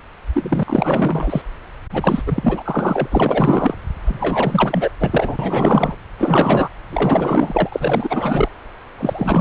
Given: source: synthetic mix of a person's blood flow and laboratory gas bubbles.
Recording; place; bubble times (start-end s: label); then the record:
Doppler ultrasound of blood flow; subclavian vein
0.33-1.42 s: bubbles
1.92-2.23 s: bubbles
2.26-3.08 s: bubbles
3.12-3.75 s: bubbles
4.04-4.89 s: bubbles
5.00-5.95 s: bubbles
6.18-6.68 s: bubbles
6.88-7.69 s: bubbles
7.72-8.49 s: bubbles
8.96-9.41 s: bubbles
From the record:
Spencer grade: 4 (maximum detectable bubble signal sounding continuously throughout systole and diastole of every cardiac period, and overriding the amplitude of the normal cardiac signals); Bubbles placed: anywhere in the cardiac cycle